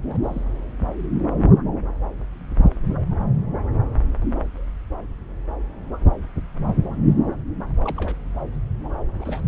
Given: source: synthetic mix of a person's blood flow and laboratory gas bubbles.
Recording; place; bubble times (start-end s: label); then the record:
Doppler ultrasound of blood flow; subclavian vein
0.03-0.45 s: bubbles
7.84-8.14 s: bubbles
9.14-9.44 s: bubbles
From the record:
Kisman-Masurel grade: 221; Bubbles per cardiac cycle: several, 3 to 8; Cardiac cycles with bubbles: 10 to 50%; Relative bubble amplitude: barely perceptible (0.100 to 0.250); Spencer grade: 2 (many but less than half of the cardiac periods contain bubble signals, singularly or in groups); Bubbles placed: anywhere in the cardiac cycle